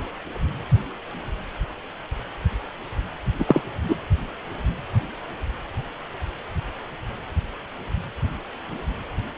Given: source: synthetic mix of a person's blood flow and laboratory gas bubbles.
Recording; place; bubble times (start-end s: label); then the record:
Doppler ultrasound of blood flow; precordium
3.38-3.45 s: bubbles
3.47-3.62 s: bubbles
3.89-3.96 s: bubbles
From the record:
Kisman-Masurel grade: 223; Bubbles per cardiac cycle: several, 3 to 8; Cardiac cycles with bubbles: 10 to 50%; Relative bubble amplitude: loud (0.450 to 0.775); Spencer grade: 2 (many but less than half of the cardiac periods contain bubble signals, singularly or in groups); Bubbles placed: only in the low amplitude regions of the cardiac cycle